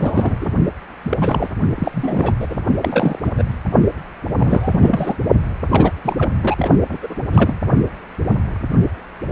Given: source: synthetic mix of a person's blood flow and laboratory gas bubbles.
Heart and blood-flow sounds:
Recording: Doppler ultrasound of blood flow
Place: precordium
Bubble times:
0.00-0.38 s: bubbles
0.41-0.52 s: bubbles
1.02-1.49 s: bubbles
1.74-2.33 s: bubbles
2.39-2.59 s: bubbles
2.82-3.18 s: bubbles
3.24-3.32 s: bubbles
3.38-3.43 s: bubbles
4.36-5.15 s: bubbles
5.69-5.92 s: bubbles
6.04-6.30 s: bubbles
6.43-6.69 s: bubbles
6.89-6.97 s: bubbles
7.02-7.15 s: bubbles
7.32-7.55 s: bubbles
From the record:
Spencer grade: 3 (all of the cardiac periods contain showers or single bubble signals, but not dominating or overriding the cardiac motion signals)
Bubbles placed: only in the low amplitude regions of the cardiac cycle

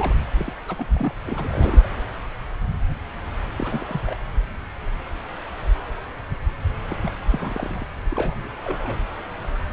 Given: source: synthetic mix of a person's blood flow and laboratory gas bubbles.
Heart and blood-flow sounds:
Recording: Doppler ultrasound of blood flow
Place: subclavian vein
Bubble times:
0.00-0.15 s: bubbles
0.39-0.52 s: bubbles
0.62-1.15 s: bubbles
1.26-1.89 s: bubbles
3.58-4.16 s: bubbles
6.90-6.97 s: bubbles
7.00-7.11 s: bubbles
7.31-7.86 s: bubbles
8.11-8.49 s: bubbles
8.61-8.99 s: bubbles
From the record:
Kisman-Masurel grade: 221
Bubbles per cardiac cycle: several, 3 to 8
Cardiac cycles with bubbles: 10 to 50%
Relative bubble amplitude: barely perceptible (0.100 to 0.250)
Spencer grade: 2 (many but less than half of the cardiac periods contain bubble signals, singularly or in groups)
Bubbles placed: anywhere in the cardiac cycle

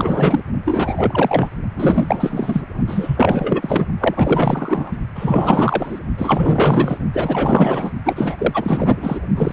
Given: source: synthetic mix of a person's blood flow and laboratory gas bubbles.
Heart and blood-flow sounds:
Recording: Doppler ultrasound of blood flow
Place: precordium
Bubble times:
0.00-0.40 s: bubbles
0.66-1.49 s: bubbles
1.76-2.64 s: bubbles
2.87-3.87 s: bubbles
4.00-4.98 s: bubbles
5.15-6.00 s: bubbles
6.17-6.98 s: bubbles
7.12-7.91 s: bubbles
8.05-9.21 s: bubbles
9.36-9.51 s: bubbles
From the record:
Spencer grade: 4 (maximum detectable bubble signal sounding continuously throughout systole and diastole of every cardiac period, and overriding the amplitude of the normal cardiac signals)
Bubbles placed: only in the low amplitude regions of the cardiac cycle

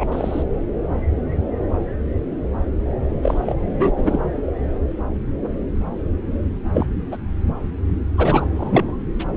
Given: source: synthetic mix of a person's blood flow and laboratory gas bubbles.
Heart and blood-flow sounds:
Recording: Doppler ultrasound of blood flow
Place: subclavian vein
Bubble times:
0.00-0.05 s: bubbles
0.12-0.42 s: bubbles
3.22-3.54 s: bubbles
3.65-3.93 s: bubbles
3.96-4.26 s: bubbles
6.73-6.87 s: bubbles
7.11-7.17 s: bubbles
8.18-8.46 s: bubbles
8.54-8.95 s: bubbles
9.19-9.24 s: bubbles
From the record:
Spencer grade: 2 (many but less than half of the cardiac periods contain bubble signals, singularly or in groups)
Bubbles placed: anywhere in the cardiac cycle

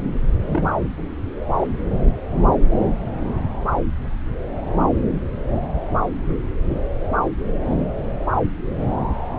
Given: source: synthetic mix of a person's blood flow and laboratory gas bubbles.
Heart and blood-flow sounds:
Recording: Doppler ultrasound of blood flow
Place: subclavian vein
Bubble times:
0.46-0.75 s: bubbles
1.56-1.68 s: bubbles
From the record:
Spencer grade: 1 (occasional bubble signal discernible with the cardiac motion signal, with majority of cardiac periods free of bubbles)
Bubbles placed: anywhere in the cardiac cycle

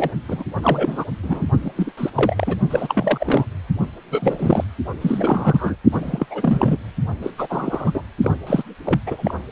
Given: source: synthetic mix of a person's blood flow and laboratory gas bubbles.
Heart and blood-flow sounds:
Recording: Doppler ultrasound of blood flow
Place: precordium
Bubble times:
0.00-0.10 s: bubbles
0.28-0.44 s: bubbles
0.62-1.04 s: bubbles
1.23-1.45 s: bubbles
1.62-1.72 s: bubbles
1.77-1.91 s: bubbles
1.97-2.10 s: bubbles
2.15-2.57 s: bubbles
2.69-3.46 s: bubbles
4.10-4.64 s: bubbles
5.01-5.76 s: bubbles
5.92-6.26 s: bubbles
6.30-6.77 s: bubbles
7.22-7.30 s: bubbles
7.38-7.47 s: bubbles
7.50-7.91 s: bubbles
7.94-8.03 s: bubbles
8.22-8.32 s: bubbles
8.46-8.63 s: bubbles
8.85-9.00 s: bubbles
9.06-9.35 s: bubbles
From the record:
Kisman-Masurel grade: 342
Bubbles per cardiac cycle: rolling drumbeat, 9 or more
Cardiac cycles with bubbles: 100%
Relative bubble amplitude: moderate (0.250 to 0.450)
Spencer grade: 3 (all of the cardiac periods contain showers or single bubble signals, but not dominating or overriding the cardiac motion signals)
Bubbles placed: only in the low amplitude regions of the cardiac cycle

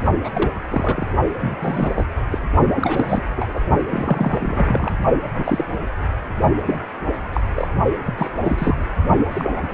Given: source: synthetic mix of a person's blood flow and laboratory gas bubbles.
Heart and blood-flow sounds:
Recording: Doppler ultrasound of blood flow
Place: precordium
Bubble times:
0.24-0.30 s: bubbles
0.33-0.51 s: bubbles
0.71-1.05 s: bubbles
1.38-2.06 s: bubbles
2.31-2.38 s: bubbles
2.76-3.23 s: bubbles
3.36-3.59 s: bubbles
3.90-4.91 s: bubbles
5.34-5.65 s: bubbles
6.66-6.80 s: bubbles
7.33-7.41 s: bubbles
7.55-7.68 s: bubbles
8.05-8.14 s: bubbles
8.17-8.30 s: bubbles
8.40-8.87 s: bubbles
9.29-9.74 s: bubbles
From the record:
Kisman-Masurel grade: 232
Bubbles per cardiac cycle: several, 3 to 8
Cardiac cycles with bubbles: 50 to 99%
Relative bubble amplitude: moderate (0.250 to 0.450)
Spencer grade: 3 (all of the cardiac periods contain showers or single bubble signals, but not dominating or overriding the cardiac motion signals)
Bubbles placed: only in the low amplitude regions of the cardiac cycle

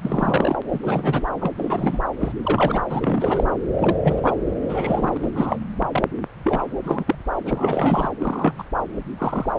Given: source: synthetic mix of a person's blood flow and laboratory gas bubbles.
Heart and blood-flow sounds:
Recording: Doppler ultrasound of blood flow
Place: subclavian vein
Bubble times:
0.02-0.57 s: bubbles
0.72-0.79 s: bubbles
0.82-1.27 s: bubbles
1.41-1.51 s: bubbles
1.57-1.99 s: bubbles
2.20-2.32 s: bubbles
2.43-2.81 s: bubbles
2.90-3.44 s: bubbles
3.73-3.96 s: bubbles
4.04-4.21 s: bubbles
4.23-4.38 s: bubbles
4.68-5.17 s: bubbles
5.22-5.29 s: bubbles
5.35-5.58 s: bubbles
5.92-6.03 s: bubbles
6.44-6.64 s: bubbles
6.83-7.04 s: bubbles
7.07-7.15 s: bubbles
7.46-8.08 s: bubbles
8.20-8.54 s: bubbles
8.58-8.64 s: bubbles
9.18-9.52 s: bubbles
From the record:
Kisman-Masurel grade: 242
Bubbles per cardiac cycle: several, 3 to 8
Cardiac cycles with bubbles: 100%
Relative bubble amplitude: moderate (0.250 to 0.450)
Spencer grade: 3 (all of the cardiac periods contain showers or single bubble signals, but not dominating or overriding the cardiac motion signals)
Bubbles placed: anywhere in the cardiac cycle

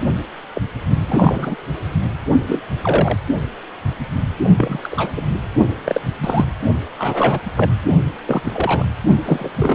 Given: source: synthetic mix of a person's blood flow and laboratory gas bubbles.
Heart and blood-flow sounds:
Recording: Doppler ultrasound of blood flow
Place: precordium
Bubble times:
0.54-0.61 s: bubbles
1.07-1.55 s: bubbles
2.47-2.60 s: bubbles
2.82-3.18 s: bubbles
4.43-4.50 s: bubbles
4.57-4.79 s: bubbles
4.83-5.25 s: bubbles
5.85-6.00 s: bubbles
6.21-6.45 s: bubbles
6.99-7.40 s: bubbles
7.57-7.71 s: bubbles
8.25-8.41 s: bubbles
8.44-8.85 s: bubbles
9.25-9.49 s: bubbles
9.56-9.75 s: bubbles
From the record:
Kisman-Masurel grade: 242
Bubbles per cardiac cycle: several, 3 to 8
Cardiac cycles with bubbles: 100%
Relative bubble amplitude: moderate (0.250 to 0.450)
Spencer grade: 3 (all of the cardiac periods contain showers or single bubble signals, but not dominating or overriding the cardiac motion signals)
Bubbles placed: only in the low amplitude regions of the cardiac cycle

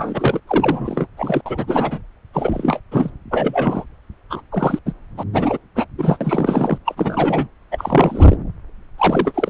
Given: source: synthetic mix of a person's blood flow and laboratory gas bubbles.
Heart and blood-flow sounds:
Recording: Doppler ultrasound of blood flow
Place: subclavian vein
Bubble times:
0.00-0.40 s: bubbles
0.47-1.06 s: bubbles
1.17-1.41 s: bubbles
1.45-2.01 s: bubbles
2.33-2.80 s: bubbles
2.91-3.10 s: bubbles
3.31-3.84 s: bubbles
4.30-4.42 s: bubbles
4.52-4.79 s: bubbles
4.86-4.94 s: bubbles
5.17-5.24 s: bubbles
5.33-5.58 s: bubbles
5.75-5.86 s: bubbles
5.98-6.18 s: bubbles
6.21-6.78 s: bubbles
6.85-7.48 s: bubbles
7.71-8.36 s: bubbles
8.97-9.50 s: bubbles
From the record:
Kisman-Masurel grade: 333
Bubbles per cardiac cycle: rolling drumbeat, 9 or more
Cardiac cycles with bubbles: 50 to 99%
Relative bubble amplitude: loud (0.450 to 0.775)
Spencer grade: 3 (all of the cardiac periods contain showers or single bubble signals, but not dominating or overriding the cardiac motion signals)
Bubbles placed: anywhere in the cardiac cycle

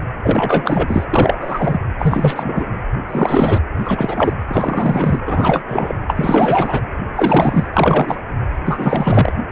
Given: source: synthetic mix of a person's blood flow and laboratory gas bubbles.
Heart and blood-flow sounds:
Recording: Doppler ultrasound of blood flow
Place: precordium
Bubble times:
0.23-1.05 s: bubbles
1.13-1.36 s: bubbles
1.41-1.78 s: bubbles
1.99-2.65 s: bubbles
3.09-3.60 s: bubbles
3.77-4.33 s: bubbles
4.48-5.20 s: bubbles
5.25-5.62 s: bubbles
5.67-5.94 s: bubbles
6.08-6.80 s: bubbles
7.15-7.67 s: bubbles
7.73-8.21 s: bubbles
8.65-9.33 s: bubbles
From the record:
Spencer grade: 3 (all of the cardiac periods contain showers or single bubble signals, but not dominating or overriding the cardiac motion signals)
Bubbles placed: anywhere in the cardiac cycle

